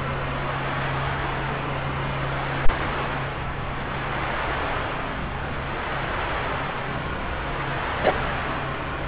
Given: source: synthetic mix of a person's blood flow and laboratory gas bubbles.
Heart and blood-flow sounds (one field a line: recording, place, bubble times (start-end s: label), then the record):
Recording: Doppler ultrasound of blood flow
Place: subclavian vein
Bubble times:
8.02-8.13 s: bubbles
From the record:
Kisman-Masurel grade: 123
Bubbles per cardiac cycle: 1 to 2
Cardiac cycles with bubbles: 10 to 50%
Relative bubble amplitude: loud (0.450 to 0.775)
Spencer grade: 2 (many but less than half of the cardiac periods contain bubble signals, singularly or in groups)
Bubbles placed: anywhere in the cardiac cycle